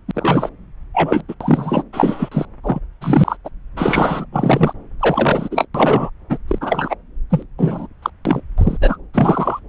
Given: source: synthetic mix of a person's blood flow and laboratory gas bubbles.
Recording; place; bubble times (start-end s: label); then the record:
Doppler ultrasound of blood flow; subclavian vein
0.08-0.11 s: bubbles
0.14-0.49 s: bubbles
0.94-1.22 s: bubbles
1.28-1.35 s: bubbles
1.41-1.84 s: bubbles
1.93-2.46 s: bubbles
2.63-2.79 s: bubbles
3.01-3.37 s: bubbles
3.45-3.50 s: bubbles
3.77-4.25 s: bubbles
4.32-4.73 s: bubbles
4.99-5.48 s: bubbles
5.51-5.68 s: bubbles
5.74-6.09 s: bubbles
6.29-6.38 s: bubbles
6.47-6.95 s: bubbles
7.30-7.45 s: bubbles
7.58-7.87 s: bubbles
8.02-8.10 s: bubbles
8.25-8.41 s: bubbles
8.57-8.78 s: bubbles
8.80-8.97 s: bubbles
9.13-9.60 s: bubbles
From the record:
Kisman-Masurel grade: 243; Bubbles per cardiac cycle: several, 3 to 8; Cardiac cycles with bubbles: 100%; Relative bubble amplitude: loud (0.450 to 0.775); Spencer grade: 3 (all of the cardiac periods contain showers or single bubble signals, but not dominating or overriding the cardiac motion signals); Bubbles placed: anywhere in the cardiac cycle